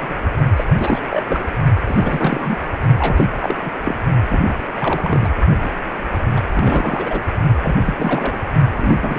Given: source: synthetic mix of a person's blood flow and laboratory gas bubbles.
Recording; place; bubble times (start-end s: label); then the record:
Doppler ultrasound of blood flow; precordium
0.00-0.16 s: bubbles
0.56-0.64 s: bubbles
0.79-1.02 s: bubbles
1.10-1.23 s: bubbles
1.28-1.45 s: bubbles
1.87-2.58 s: bubbles
2.98-3.26 s: bubbles
3.38-3.56 s: bubbles
3.61-3.70 s: bubbles
3.84-3.95 s: bubbles
4.28-4.54 s: bubbles
4.75-5.29 s: bubbles
5.63-5.71 s: bubbles
6.11-6.18 s: bubbles
6.36-6.40 s: bubbles
6.53-7.20 s: bubbles
7.63-7.76 s: bubbles
7.85-7.94 s: bubbles
7.97-8.40 s: bubbles
8.76-9.18 s: bubbles
From the record:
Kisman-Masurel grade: 342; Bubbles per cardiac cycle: rolling drumbeat, 9 or more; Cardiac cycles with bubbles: 100%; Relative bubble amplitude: moderate (0.250 to 0.450); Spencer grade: 3 (all of the cardiac periods contain showers or single bubble signals, but not dominating or overriding the cardiac motion signals); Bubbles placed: only in the low amplitude regions of the cardiac cycle